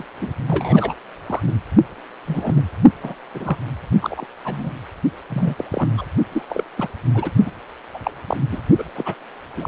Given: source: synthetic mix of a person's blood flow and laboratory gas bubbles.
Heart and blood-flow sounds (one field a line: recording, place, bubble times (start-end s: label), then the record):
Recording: Doppler ultrasound of blood flow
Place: precordium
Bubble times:
0.00-0.05 s: bubbles
0.21-0.29 s: bubbles
0.47-0.94 s: bubbles
1.26-1.41 s: bubbles
1.46-1.52 s: bubbles
2.26-2.63 s: bubbles
3.02-3.15 s: bubbles
3.34-3.56 s: bubbles
4.01-4.25 s: bubbles
4.45-4.71 s: bubbles
5.30-5.54 s: bubbles
5.58-5.64 s: bubbles
5.71-5.89 s: bubbles
5.97-6.05 s: bubbles
6.32-6.42 s: bubbles
6.49-6.63 s: bubbles
6.78-6.88 s: bubbles
7.14-7.30 s: bubbles
7.46-7.51 s: bubbles
7.93-7.99 s: bubbles
8.04-8.11 s: bubbles
8.27-8.37 s: bubbles
8.51-8.61 s: bubbles
8.78-8.84 s: bubbles
8.95-9.15 s: bubbles
9.57-9.67 s: bubbles
From the record:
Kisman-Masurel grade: 242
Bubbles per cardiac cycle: several, 3 to 8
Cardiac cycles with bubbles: 100%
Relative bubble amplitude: moderate (0.250 to 0.450)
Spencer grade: 3 (all of the cardiac periods contain showers or single bubble signals, but not dominating or overriding the cardiac motion signals)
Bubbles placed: only in the low amplitude regions of the cardiac cycle